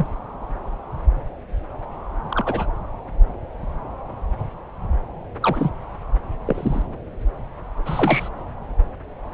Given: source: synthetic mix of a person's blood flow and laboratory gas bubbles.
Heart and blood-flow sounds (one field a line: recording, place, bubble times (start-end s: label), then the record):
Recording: Doppler ultrasound of blood flow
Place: subclavian vein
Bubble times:
0.00-0.07 s: bubbles
2.30-2.66 s: bubbles
5.41-5.70 s: bubbles
6.46-6.83 s: bubbles
7.85-8.29 s: bubbles
From the record:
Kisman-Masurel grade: 122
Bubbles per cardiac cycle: 1 to 2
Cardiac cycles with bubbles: 10 to 50%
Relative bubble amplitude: moderate (0.250 to 0.450)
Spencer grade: 2 (many but less than half of the cardiac periods contain bubble signals, singularly or in groups)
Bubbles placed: anywhere in the cardiac cycle